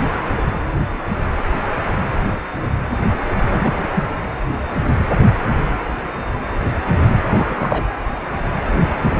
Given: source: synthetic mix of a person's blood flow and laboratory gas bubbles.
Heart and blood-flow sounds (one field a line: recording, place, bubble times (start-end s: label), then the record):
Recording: Doppler ultrasound of blood flow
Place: precordium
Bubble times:
3.48-3.74 s: bubbles
3.95-4.04 s: bubbles
7.28-7.83 s: bubbles
From the record:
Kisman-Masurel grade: 222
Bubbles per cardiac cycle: several, 3 to 8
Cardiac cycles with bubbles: 10 to 50%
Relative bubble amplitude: moderate (0.250 to 0.450)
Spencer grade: 2 (many but less than half of the cardiac periods contain bubble signals, singularly or in groups)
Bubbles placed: anywhere in the cardiac cycle